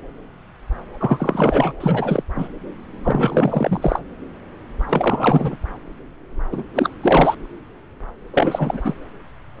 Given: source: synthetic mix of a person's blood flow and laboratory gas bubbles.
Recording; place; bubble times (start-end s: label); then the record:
Doppler ultrasound of blood flow; subclavian vein
1.00-1.73 s: bubbles
1.80-2.23 s: bubbles
2.35-2.48 s: bubbles
3.04-3.99 s: bubbles
4.88-5.57 s: bubbles
6.51-6.64 s: bubbles
6.74-6.92 s: bubbles
7.02-7.35 s: bubbles
8.34-8.80 s: bubbles
8.84-8.94 s: bubbles
From the record:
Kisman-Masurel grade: 332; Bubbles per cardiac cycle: rolling drumbeat, 9 or more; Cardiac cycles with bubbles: 50 to 99%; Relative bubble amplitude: moderate (0.250 to 0.450); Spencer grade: 3 (all of the cardiac periods contain showers or single bubble signals, but not dominating or overriding the cardiac motion signals); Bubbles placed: anywhere in the cardiac cycle